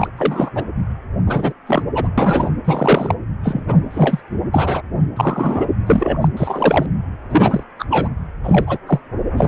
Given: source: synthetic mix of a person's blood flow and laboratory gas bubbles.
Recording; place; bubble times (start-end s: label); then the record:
Doppler ultrasound of blood flow; precordium
0.00-0.07 s: bubbles
0.17-0.50 s: bubbles
0.54-0.64 s: bubbles
1.25-1.53 s: bubbles
1.66-1.82 s: bubbles
1.94-2.09 s: bubbles
2.18-2.52 s: bubbles
2.65-3.15 s: bubbles
3.43-3.65 s: bubbles
3.68-3.79 s: bubbles
3.91-4.21 s: bubbles
4.54-4.82 s: bubbles
5.16-5.66 s: bubbles
5.86-6.29 s: bubbles
6.36-6.86 s: bubbles
7.30-7.63 s: bubbles
7.79-7.85 s: bubbles
7.89-8.09 s: bubbles
8.44-8.78 s: bubbles
8.87-9.00 s: bubbles
9.37-9.48 s: bubbles
From the record:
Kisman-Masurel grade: 243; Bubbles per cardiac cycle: several, 3 to 8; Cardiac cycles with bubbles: 100%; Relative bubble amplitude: loud (0.450 to 0.775); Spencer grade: 3 (all of the cardiac periods contain showers or single bubble signals, but not dominating or overriding the cardiac motion signals); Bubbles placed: anywhere in the cardiac cycle